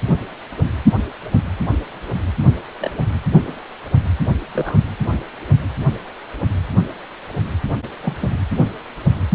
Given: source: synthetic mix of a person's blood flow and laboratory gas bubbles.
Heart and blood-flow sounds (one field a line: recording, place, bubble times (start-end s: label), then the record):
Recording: Doppler ultrasound of blood flow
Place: precordium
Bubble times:
2.80-2.90 s: bubbles
3.46-3.53 s: bubbles
4.52-4.78 s: bubbles
8.01-8.16 s: bubbles
8.20-8.30 s: bubbles
From the record:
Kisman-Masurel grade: 122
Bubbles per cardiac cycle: 1 to 2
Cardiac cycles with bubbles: 10 to 50%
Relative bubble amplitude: moderate (0.250 to 0.450)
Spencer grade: 2 (many but less than half of the cardiac periods contain bubble signals, singularly or in groups)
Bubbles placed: anywhere in the cardiac cycle